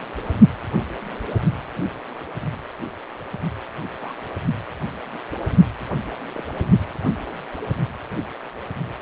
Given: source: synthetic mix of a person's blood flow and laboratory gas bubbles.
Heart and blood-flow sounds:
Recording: Doppler ultrasound of blood flow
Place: precordium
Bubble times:
3.98-4.15 s: bubbles
6.35-6.42 s: bubbles
From the record:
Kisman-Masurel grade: 121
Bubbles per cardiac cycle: 1 to 2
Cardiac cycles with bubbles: 10 to 50%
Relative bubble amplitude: barely perceptible (0.100 to 0.250)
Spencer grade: 2 (many but less than half of the cardiac periods contain bubble signals, singularly or in groups)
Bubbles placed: only in the low amplitude regions of the cardiac cycle

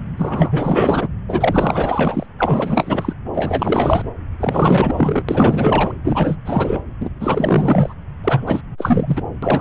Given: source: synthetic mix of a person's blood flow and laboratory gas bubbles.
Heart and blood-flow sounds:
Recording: Doppler ultrasound of blood flow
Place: subclavian vein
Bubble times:
0.17-1.08 s: bubbles
1.28-2.26 s: bubbles
2.36-3.13 s: bubbles
3.33-4.08 s: bubbles
4.39-5.23 s: bubbles
5.29-5.92 s: bubbles
6.04-6.37 s: bubbles
6.45-6.81 s: bubbles
7.00-7.09 s: bubbles
7.20-7.94 s: bubbles
8.24-8.61 s: bubbles
8.78-9.22 s: bubbles
9.43-9.61 s: bubbles
From the record:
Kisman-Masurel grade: 444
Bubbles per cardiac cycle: continuous sound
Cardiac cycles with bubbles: 100%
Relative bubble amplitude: maximal (0.775 to 0.999)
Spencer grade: 4 (maximum detectable bubble signal sounding continuously throughout systole and diastole of every cardiac period, and overriding the amplitude of the normal cardiac signals)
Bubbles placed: anywhere in the cardiac cycle

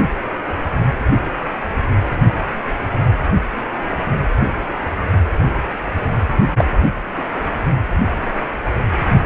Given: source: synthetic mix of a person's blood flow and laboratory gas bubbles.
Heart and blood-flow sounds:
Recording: Doppler ultrasound of blood flow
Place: precordium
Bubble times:
6.56-6.64 s: bubbles
7.17-7.22 s: bubbles
From the record:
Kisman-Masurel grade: 113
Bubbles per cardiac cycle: 1 to 2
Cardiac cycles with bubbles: 1 to 10%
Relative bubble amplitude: loud (0.450 to 0.775)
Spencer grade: 1 (occasional bubble signal discernible with the cardiac motion signal, with majority of cardiac periods free of bubbles)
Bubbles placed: anywhere in the cardiac cycle

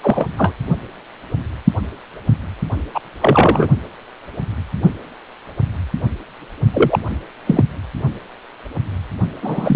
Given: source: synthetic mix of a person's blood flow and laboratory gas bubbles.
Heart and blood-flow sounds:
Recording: Doppler ultrasound of blood flow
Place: precordium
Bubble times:
0.02-0.27 s: bubbles
0.37-0.53 s: bubbles
2.94-3.00 s: bubbles
3.21-3.68 s: bubbles
6.74-6.99 s: bubbles
7.47-7.63 s: bubbles
9.42-9.76 s: bubbles
From the record:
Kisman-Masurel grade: 223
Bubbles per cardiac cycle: several, 3 to 8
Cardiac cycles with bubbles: 10 to 50%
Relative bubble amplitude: loud (0.450 to 0.775)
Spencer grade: 2 (many but less than half of the cardiac periods contain bubble signals, singularly or in groups)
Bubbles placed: only in the low amplitude regions of the cardiac cycle

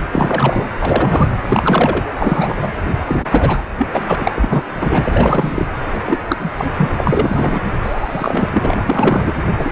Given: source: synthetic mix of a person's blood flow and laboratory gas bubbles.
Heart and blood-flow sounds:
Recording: Doppler ultrasound of blood flow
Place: precordium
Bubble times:
0.10-0.69 s: bubbles
0.80-1.35 s: bubbles
1.47-2.05 s: bubbles
2.18-2.69 s: bubbles
3.07-3.26 s: bubbles
3.31-3.62 s: bubbles
3.77-3.87 s: bubbles
3.94-4.16 s: bubbles
4.20-4.32 s: bubbles
4.35-4.64 s: bubbles
4.80-5.65 s: bubbles
5.94-6.00 s: bubbles
6.06-6.20 s: bubbles
6.29-6.36 s: bubbles
6.39-6.51 s: bubbles
6.57-6.67 s: bubbles
6.78-6.91 s: bubbles
6.97-7.62 s: bubbles
7.82-9.32 s: bubbles
9.58-9.71 s: bubbles
From the record:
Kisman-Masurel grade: 343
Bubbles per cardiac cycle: rolling drumbeat, 9 or more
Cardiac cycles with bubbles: 100%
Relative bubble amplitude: loud (0.450 to 0.775)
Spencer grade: 3 (all of the cardiac periods contain showers or single bubble signals, but not dominating or overriding the cardiac motion signals)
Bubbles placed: anywhere in the cardiac cycle

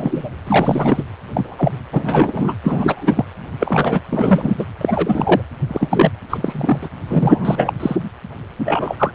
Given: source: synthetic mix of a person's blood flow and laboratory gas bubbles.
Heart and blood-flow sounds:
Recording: Doppler ultrasound of blood flow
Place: precordium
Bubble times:
0.00-0.30 s: bubbles
0.46-1.04 s: bubbles
1.35-1.72 s: bubbles
1.93-2.55 s: bubbles
2.64-3.25 s: bubbles
3.60-4.00 s: bubbles
4.09-4.54 s: bubbles
4.58-4.65 s: bubbles
4.81-5.43 s: bubbles
5.68-6.11 s: bubbles
6.28-6.89 s: bubbles
7.08-7.73 s: bubbles
7.79-7.96 s: bubbles
8.65-8.96 s: bubbles
8.99-9.11 s: bubbles
From the record:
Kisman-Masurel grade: 233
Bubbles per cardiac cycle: several, 3 to 8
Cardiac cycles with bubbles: 50 to 99%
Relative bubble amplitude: loud (0.450 to 0.775)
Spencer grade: 3 (all of the cardiac periods contain showers or single bubble signals, but not dominating or overriding the cardiac motion signals)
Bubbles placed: anywhere in the cardiac cycle

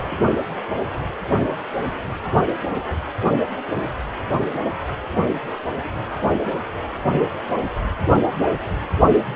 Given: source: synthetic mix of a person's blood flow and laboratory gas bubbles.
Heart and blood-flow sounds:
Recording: Doppler ultrasound of blood flow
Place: precordium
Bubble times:
0.04-0.18 s: bubbles
From the record:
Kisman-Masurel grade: 121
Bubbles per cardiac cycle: 1 to 2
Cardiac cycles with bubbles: 10 to 50%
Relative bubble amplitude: barely perceptible (0.100 to 0.250)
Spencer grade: 2 (many but less than half of the cardiac periods contain bubble signals, singularly or in groups)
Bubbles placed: only in the low amplitude regions of the cardiac cycle

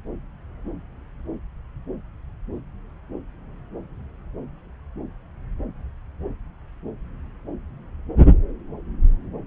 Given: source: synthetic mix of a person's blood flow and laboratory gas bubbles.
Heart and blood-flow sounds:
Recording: Doppler ultrasound of blood flow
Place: subclavian vein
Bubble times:
no bubbles
From the record:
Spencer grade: 0 (complete lack of bubble signals)

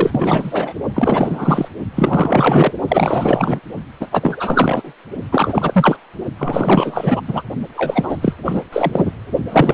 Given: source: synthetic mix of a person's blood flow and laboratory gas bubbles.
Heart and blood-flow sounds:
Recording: Doppler ultrasound of blood flow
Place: precordium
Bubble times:
0.00-0.73 s: bubbles
0.94-1.68 s: bubbles
1.95-2.73 s: bubbles
2.88-3.60 s: bubbles
4.00-4.07 s: bubbles
4.11-4.93 s: bubbles
5.31-5.96 s: bubbles
6.38-7.21 s: bubbles
7.27-7.43 s: bubbles
7.75-8.18 s: bubbles
8.21-8.35 s: bubbles
8.45-8.63 s: bubbles
8.73-9.12 s: bubbles
9.47-9.73 s: bubbles
From the record:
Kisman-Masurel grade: 444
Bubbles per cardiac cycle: continuous sound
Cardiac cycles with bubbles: 100%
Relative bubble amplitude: maximal (0.775 to 0.999)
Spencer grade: 4 (maximum detectable bubble signal sounding continuously throughout systole and diastole of every cardiac period, and overriding the amplitude of the normal cardiac signals)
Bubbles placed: only in the low amplitude regions of the cardiac cycle

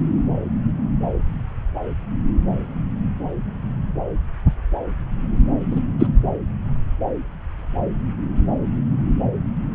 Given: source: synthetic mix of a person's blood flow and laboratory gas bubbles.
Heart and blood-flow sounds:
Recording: Doppler ultrasound of blood flow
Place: subclavian vein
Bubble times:
5.71-5.80 s: bubbles
6.00-6.07 s: bubbles
From the record:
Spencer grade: 2 (many but less than half of the cardiac periods contain bubble signals, singularly or in groups)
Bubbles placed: anywhere in the cardiac cycle

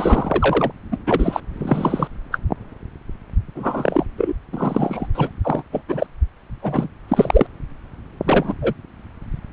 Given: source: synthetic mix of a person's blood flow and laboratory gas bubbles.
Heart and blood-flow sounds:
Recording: Doppler ultrasound of blood flow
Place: subclavian vein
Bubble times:
0.00-0.71 s: bubbles
0.91-0.97 s: bubbles
1.06-1.40 s: bubbles
1.57-2.07 s: bubbles
2.31-2.39 s: bubbles
3.55-4.06 s: bubbles
4.18-4.33 s: bubbles
4.52-5.07 s: bubbles
5.15-5.30 s: bubbles
5.44-5.62 s: bubbles
5.72-5.81 s: bubbles
5.88-6.07 s: bubbles
6.62-6.88 s: bubbles
7.08-7.47 s: bubbles
8.23-8.54 s: bubbles
8.62-8.73 s: bubbles
From the record:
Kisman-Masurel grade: 243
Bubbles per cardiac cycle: several, 3 to 8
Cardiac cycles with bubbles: 100%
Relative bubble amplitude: loud (0.450 to 0.775)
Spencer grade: 3 (all of the cardiac periods contain showers or single bubble signals, but not dominating or overriding the cardiac motion signals)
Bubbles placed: anywhere in the cardiac cycle

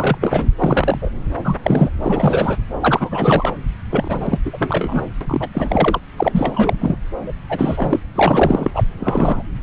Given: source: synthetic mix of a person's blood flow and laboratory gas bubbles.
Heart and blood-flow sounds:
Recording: Doppler ultrasound of blood flow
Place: subclavian vein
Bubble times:
0.00-0.18 s: bubbles
0.21-0.50 s: bubbles
0.57-1.10 s: bubbles
1.44-1.57 s: bubbles
1.62-1.90 s: bubbles
1.98-2.56 s: bubbles
2.81-3.55 s: bubbles
3.90-4.38 s: bubbles
4.45-5.06 s: bubbles
5.21-5.50 s: bubbles
5.53-6.00 s: bubbles
6.17-6.97 s: bubbles
7.26-7.33 s: bubbles
7.49-8.02 s: bubbles
8.14-8.71 s: bubbles
8.74-8.83 s: bubbles
9.00-9.43 s: bubbles
From the record:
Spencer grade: 3 (all of the cardiac periods contain showers or single bubble signals, but not dominating or overriding the cardiac motion signals)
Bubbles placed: anywhere in the cardiac cycle

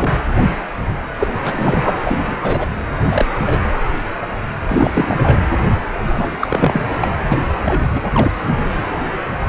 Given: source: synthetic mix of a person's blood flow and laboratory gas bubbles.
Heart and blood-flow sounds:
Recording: Doppler ultrasound of blood flow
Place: precordium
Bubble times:
0.00-0.12 s: bubbles
1.19-1.28 s: bubbles
1.44-2.00 s: bubbles
2.04-2.17 s: bubbles
2.26-2.36 s: bubbles
2.42-2.67 s: bubbles
3.07-3.25 s: bubbles
3.46-3.60 s: bubbles
4.69-5.38 s: bubbles
6.03-6.37 s: bubbles
6.41-6.81 s: bubbles
7.04-7.08 s: bubbles
7.21-7.38 s: bubbles
7.65-7.88 s: bubbles
7.95-8.01 s: bubbles
8.14-8.32 s: bubbles
From the record:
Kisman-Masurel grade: 232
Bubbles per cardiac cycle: several, 3 to 8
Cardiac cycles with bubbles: 50 to 99%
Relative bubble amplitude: moderate (0.250 to 0.450)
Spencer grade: 3 (all of the cardiac periods contain showers or single bubble signals, but not dominating or overriding the cardiac motion signals)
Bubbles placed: anywhere in the cardiac cycle

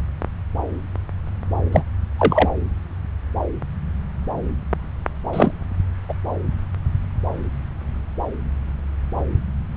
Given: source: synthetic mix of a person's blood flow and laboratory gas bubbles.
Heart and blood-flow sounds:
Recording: Doppler ultrasound of blood flow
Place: subclavian vein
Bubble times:
1.72-1.82 s: bubbles
2.18-2.49 s: bubbles
5.33-5.52 s: bubbles
6.08-6.13 s: bubbles
From the record:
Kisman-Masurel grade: 123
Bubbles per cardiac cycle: 1 to 2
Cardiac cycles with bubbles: 10 to 50%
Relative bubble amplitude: loud (0.450 to 0.775)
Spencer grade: 2 (many but less than half of the cardiac periods contain bubble signals, singularly or in groups)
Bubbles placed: anywhere in the cardiac cycle

